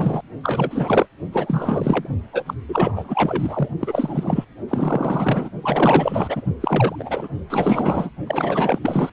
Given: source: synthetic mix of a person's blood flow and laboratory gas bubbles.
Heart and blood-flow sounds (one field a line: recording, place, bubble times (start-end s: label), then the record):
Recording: Doppler ultrasound of blood flow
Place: precordium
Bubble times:
0.00-0.22 s: bubbles
0.43-1.06 s: bubbles
1.32-2.08 s: bubbles
2.33-2.43 s: bubbles
2.46-2.54 s: bubbles
2.69-3.69 s: bubbles
3.79-4.45 s: bubbles
4.68-5.50 s: bubbles
5.61-6.45 s: bubbles
6.60-6.95 s: bubbles
6.98-7.28 s: bubbles
7.50-8.10 s: bubbles
8.26-8.79 s: bubbles
8.82-9.10 s: bubbles
From the record:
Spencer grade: 4 (maximum detectable bubble signal sounding continuously throughout systole and diastole of every cardiac period, and overriding the amplitude of the normal cardiac signals)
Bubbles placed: only in the low amplitude regions of the cardiac cycle